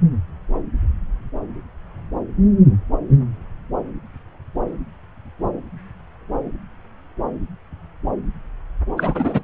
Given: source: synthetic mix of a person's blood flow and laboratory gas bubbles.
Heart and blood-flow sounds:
Doppler ultrasound of blood flow; subclavian vein
8.97-9.42 s: bubbles
From the record:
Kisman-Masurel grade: 213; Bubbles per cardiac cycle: several, 3 to 8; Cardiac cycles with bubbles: 1 to 10%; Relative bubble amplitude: loud (0.450 to 0.775); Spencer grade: 1 (occasional bubble signal discernible with the cardiac motion signal, with majority of cardiac periods free of bubbles); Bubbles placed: anywhere in the cardiac cycle

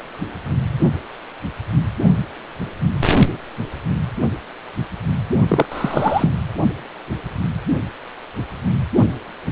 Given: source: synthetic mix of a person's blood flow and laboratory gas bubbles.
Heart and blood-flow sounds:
Doppler ultrasound of blood flow; precordium
5.48-5.66 s: bubbles
5.71-6.29 s: bubbles
From the record:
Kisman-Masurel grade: 213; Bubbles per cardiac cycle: several, 3 to 8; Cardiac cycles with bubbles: 1 to 10%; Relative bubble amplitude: loud (0.450 to 0.775); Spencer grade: 1 (occasional bubble signal discernible with the cardiac motion signal, with majority of cardiac periods free of bubbles); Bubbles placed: only in the low amplitude regions of the cardiac cycle

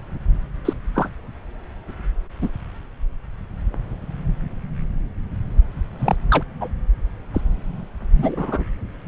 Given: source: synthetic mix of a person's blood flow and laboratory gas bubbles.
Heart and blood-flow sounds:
Doppler ultrasound of blood flow; subclavian vein
0.65-0.73 s: bubbles
0.94-1.09 s: bubbles
2.42-2.49 s: bubbles
5.99-6.16 s: bubbles
6.30-6.43 s: bubbles
6.61-6.69 s: bubbles
7.33-7.41 s: bubbles
8.18-8.65 s: bubbles
From the record:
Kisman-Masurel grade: 122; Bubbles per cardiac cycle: 1 to 2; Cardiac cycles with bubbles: 10 to 50%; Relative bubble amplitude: moderate (0.250 to 0.450); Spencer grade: 2 (many but less than half of the cardiac periods contain bubble signals, singularly or in groups); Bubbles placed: anywhere in the cardiac cycle

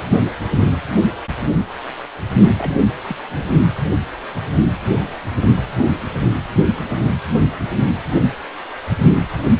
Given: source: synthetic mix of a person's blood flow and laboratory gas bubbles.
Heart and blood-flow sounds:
Doppler ultrasound of blood flow; precordium
2.58-2.81 s: bubbles
3.07-3.17 s: bubbles
3.35-3.48 s: bubbles
From the record:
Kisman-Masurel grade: 211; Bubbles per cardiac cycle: several, 3 to 8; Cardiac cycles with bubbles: 1 to 10%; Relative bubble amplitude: barely perceptible (0.100 to 0.250); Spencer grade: 1 (occasional bubble signal discernible with the cardiac motion signal, with majority of cardiac periods free of bubbles); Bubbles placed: only in the low amplitude regions of the cardiac cycle

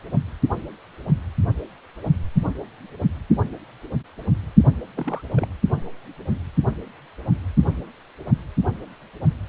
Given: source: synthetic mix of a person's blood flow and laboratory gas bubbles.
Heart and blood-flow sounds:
Doppler ultrasound of blood flow; precordium
4.97-5.21 s: bubbles
5.36-5.47 s: bubbles
From the record:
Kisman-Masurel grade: 211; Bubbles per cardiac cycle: several, 3 to 8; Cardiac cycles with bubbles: 1 to 10%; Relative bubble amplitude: barely perceptible (0.100 to 0.250); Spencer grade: 1 (occasional bubble signal discernible with the cardiac motion signal, with majority of cardiac periods free of bubbles); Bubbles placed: anywhere in the cardiac cycle

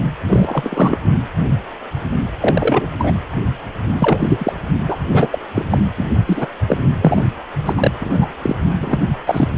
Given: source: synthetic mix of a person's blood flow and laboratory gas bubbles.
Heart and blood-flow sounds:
Doppler ultrasound of blood flow; precordium
0.27-0.98 s: bubbles
2.40-2.87 s: bubbles
2.99-3.14 s: bubbles
3.99-4.53 s: bubbles
4.88-4.97 s: bubbles
5.12-5.38 s: bubbles
5.48-5.79 s: bubbles
5.97-6.04 s: bubbles
6.26-6.47 s: bubbles
6.67-6.77 s: bubbles
7.01-7.30 s: bubbles
7.65-7.73 s: bubbles
7.77-7.91 s: bubbles
8.00-8.27 s: bubbles
8.42-8.55 s: bubbles
8.80-9.05 s: bubbles
9.27-9.48 s: bubbles
From the record:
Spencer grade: 3 (all of the cardiac periods contain showers or single bubble signals, but not dominating or overriding the cardiac motion signals); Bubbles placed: only in the low amplitude regions of the cardiac cycle

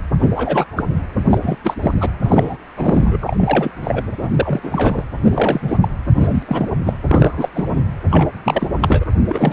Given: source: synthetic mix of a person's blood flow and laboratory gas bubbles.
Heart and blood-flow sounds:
Doppler ultrasound of blood flow; precordium
0.19-0.29 s: bubbles
0.35-0.67 s: bubbles
0.76-0.83 s: bubbles
0.89-1.01 s: bubbles
1.29-1.38 s: bubbles
1.41-1.58 s: bubbles
1.64-1.74 s: bubbles
1.82-1.95 s: bubbles
2.00-2.11 s: bubbles
2.24-2.57 s: bubbles
2.76-3.71 s: bubbles
3.83-4.04 s: bubbles
4.20-4.61 s: bubbles
4.63-5.04 s: bubbles
5.25-5.77 s: bubbles
5.81-5.88 s: bubbles
6.17-6.42 s: bubbles
6.46-6.69 s: bubbles
6.85-6.94 s: bubbles
7.08-7.49 s: bubbles
7.54-7.82 s: bubbles
8.10-8.32 s: bubbles
8.45-8.68 s: bubbles
8.81-9.04 s: bubbles
9.29-9.53 s: bubbles
From the record:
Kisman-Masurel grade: 343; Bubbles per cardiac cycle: rolling drumbeat, 9 or more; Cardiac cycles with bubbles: 100%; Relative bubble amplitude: loud (0.450 to 0.775); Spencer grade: 3 (all of the cardiac periods contain showers or single bubble signals, but not dominating or overriding the cardiac motion signals); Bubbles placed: anywhere in the cardiac cycle

